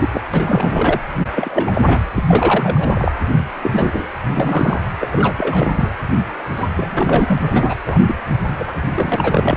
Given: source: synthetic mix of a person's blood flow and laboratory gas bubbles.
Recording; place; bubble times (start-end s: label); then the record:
Doppler ultrasound of blood flow; precordium
0.00-0.09 s: bubbles
0.14-0.21 s: bubbles
0.33-1.00 s: bubbles
1.34-1.81 s: bubbles
1.83-1.99 s: bubbles
2.14-2.24 s: bubbles
2.27-3.14 s: bubbles
3.62-4.07 s: bubbles
4.34-4.82 s: bubbles
5.00-5.08 s: bubbles
5.11-5.93 s: bubbles
6.55-6.67 s: bubbles
6.76-7.38 s: bubbles
7.41-7.99 s: bubbles
8.06-8.15 s: bubbles
8.58-8.64 s: bubbles
8.67-8.72 s: bubbles
8.94-9.57 s: bubbles
From the record:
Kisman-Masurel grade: 342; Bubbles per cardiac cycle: rolling drumbeat, 9 or more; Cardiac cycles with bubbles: 100%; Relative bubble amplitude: moderate (0.250 to 0.450); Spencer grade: 3 (all of the cardiac periods contain showers or single bubble signals, but not dominating or overriding the cardiac motion signals); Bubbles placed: anywhere in the cardiac cycle